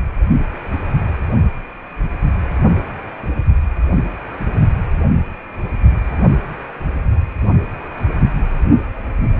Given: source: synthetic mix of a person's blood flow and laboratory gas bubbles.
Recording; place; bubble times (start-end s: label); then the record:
Doppler ultrasound of blood flow; precordium
no bubbles
From the record:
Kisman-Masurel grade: 000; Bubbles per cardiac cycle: 0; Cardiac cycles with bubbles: 0%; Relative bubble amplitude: no bubbles discernible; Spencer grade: 0 (complete lack of bubble signals)